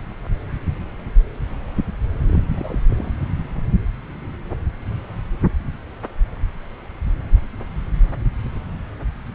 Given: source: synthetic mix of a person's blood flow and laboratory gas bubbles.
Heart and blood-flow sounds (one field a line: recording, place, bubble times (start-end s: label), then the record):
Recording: Doppler ultrasound of blood flow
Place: subclavian vein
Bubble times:
2.26-2.44 s: bubbles
2.52-2.86 s: bubbles
2.90-3.26 s: bubbles
From the record:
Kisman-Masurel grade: 211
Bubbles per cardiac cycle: several, 3 to 8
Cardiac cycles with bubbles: 1 to 10%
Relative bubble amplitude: barely perceptible (0.100 to 0.250)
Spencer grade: 1 (occasional bubble signal discernible with the cardiac motion signal, with majority of cardiac periods free of bubbles)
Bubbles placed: anywhere in the cardiac cycle